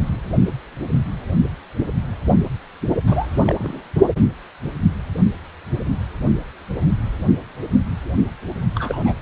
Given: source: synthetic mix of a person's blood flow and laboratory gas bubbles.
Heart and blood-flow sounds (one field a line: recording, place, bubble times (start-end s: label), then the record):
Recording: Doppler ultrasound of blood flow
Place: precordium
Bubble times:
3.07-3.81 s: bubbles
8.75-9.22 s: bubbles
From the record:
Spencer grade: 2 (many but less than half of the cardiac periods contain bubble signals, singularly or in groups)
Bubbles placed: only in the low amplitude regions of the cardiac cycle